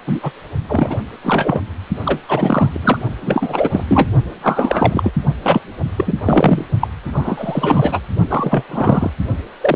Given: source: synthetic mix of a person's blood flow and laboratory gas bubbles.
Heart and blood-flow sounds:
Doppler ultrasound of blood flow; precordium
0.07-0.32 s: bubbles
0.69-0.98 s: bubbles
1.23-1.60 s: bubbles
2.05-2.20 s: bubbles
2.28-2.79 s: bubbles
2.83-2.99 s: bubbles
3.22-3.83 s: bubbles
3.88-4.09 s: bubbles
4.41-5.11 s: bubbles
5.43-5.60 s: bubbles
5.95-6.14 s: bubbles
6.25-6.64 s: bubbles
6.79-6.88 s: bubbles
7.04-8.00 s: bubbles
8.29-8.63 s: bubbles
8.69-9.11 s: bubbles
9.61-9.76 s: bubbles
From the record:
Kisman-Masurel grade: 343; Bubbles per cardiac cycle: rolling drumbeat, 9 or more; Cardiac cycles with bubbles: 100%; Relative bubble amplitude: loud (0.450 to 0.775); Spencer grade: 3 (all of the cardiac periods contain showers or single bubble signals, but not dominating or overriding the cardiac motion signals); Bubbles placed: only in the low amplitude regions of the cardiac cycle

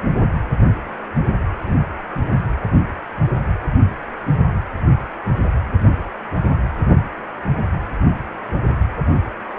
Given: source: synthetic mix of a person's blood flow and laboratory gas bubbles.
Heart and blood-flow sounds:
Doppler ultrasound of blood flow; precordium
1.61-1.73 s: bubbles
2.29-2.40 s: bubbles
From the record:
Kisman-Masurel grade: 111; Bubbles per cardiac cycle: 1 to 2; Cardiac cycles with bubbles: 1 to 10%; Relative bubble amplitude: barely perceptible (0.100 to 0.250); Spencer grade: 1 (occasional bubble signal discernible with the cardiac motion signal, with majority of cardiac periods free of bubbles); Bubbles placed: anywhere in the cardiac cycle

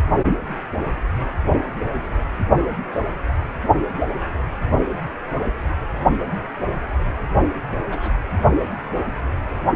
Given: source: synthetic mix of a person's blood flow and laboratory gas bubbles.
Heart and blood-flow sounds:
Doppler ultrasound of blood flow; precordium
7.90-8.10 s: bubbles
From the record:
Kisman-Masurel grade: 122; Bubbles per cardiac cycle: 1 to 2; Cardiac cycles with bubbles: 10 to 50%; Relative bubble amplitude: moderate (0.250 to 0.450); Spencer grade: 2 (many but less than half of the cardiac periods contain bubble signals, singularly or in groups); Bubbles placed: only in the low amplitude regions of the cardiac cycle

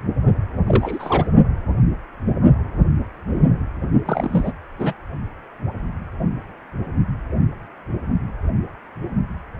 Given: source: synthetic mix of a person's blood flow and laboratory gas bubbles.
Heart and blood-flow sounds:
Doppler ultrasound of blood flow; precordium
0.67-1.27 s: bubbles
4.05-4.53 s: bubbles
4.79-4.93 s: bubbles
From the record:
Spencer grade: 2 (many but less than half of the cardiac periods contain bubble signals, singularly or in groups); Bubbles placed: only in the low amplitude regions of the cardiac cycle

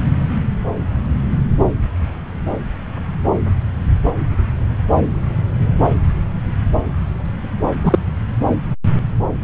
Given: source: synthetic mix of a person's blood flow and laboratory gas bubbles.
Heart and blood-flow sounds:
Doppler ultrasound of blood flow; subclavian vein
7.83-7.99 s: bubbles
From the record:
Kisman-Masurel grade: 113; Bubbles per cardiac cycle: 1 to 2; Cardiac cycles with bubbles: 1 to 10%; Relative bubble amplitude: loud (0.450 to 0.775); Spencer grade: 1 (occasional bubble signal discernible with the cardiac motion signal, with majority of cardiac periods free of bubbles); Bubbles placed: anywhere in the cardiac cycle

